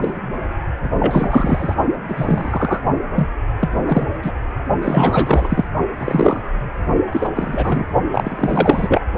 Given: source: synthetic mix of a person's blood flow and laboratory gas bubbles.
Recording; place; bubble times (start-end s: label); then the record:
Doppler ultrasound of blood flow; precordium
0.00-0.20 s: bubbles
0.83-0.90 s: bubbles
0.99-1.76 s: bubbles
2.08-2.80 s: bubbles
3.15-3.28 s: bubbles
3.61-3.70 s: bubbles
3.86-4.08 s: bubbles
4.23-4.32 s: bubbles
4.82-5.65 s: bubbles
5.98-6.40 s: bubbles
7.12-7.29 s: bubbles
7.35-7.85 s: bubbles
8.12-9.01 s: bubbles
From the record:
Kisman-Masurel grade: 243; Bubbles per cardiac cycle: several, 3 to 8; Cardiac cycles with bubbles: 100%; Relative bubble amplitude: loud (0.450 to 0.775); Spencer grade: 3 (all of the cardiac periods contain showers or single bubble signals, but not dominating or overriding the cardiac motion signals); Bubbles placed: only in the low amplitude regions of the cardiac cycle